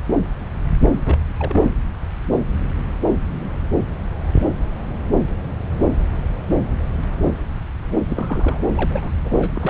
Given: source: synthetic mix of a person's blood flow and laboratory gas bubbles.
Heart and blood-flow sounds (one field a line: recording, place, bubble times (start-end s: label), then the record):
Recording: Doppler ultrasound of blood flow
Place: subclavian vein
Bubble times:
0.93-1.66 s: bubbles
8.08-8.62 s: bubbles
8.75-9.11 s: bubbles
9.24-9.37 s: bubbles
9.39-9.52 s: bubbles
9.56-9.70 s: bubbles
From the record:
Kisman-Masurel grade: 221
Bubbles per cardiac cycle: several, 3 to 8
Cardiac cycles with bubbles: 10 to 50%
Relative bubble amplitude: barely perceptible (0.100 to 0.250)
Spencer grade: 2 (many but less than half of the cardiac periods contain bubble signals, singularly or in groups)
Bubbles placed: anywhere in the cardiac cycle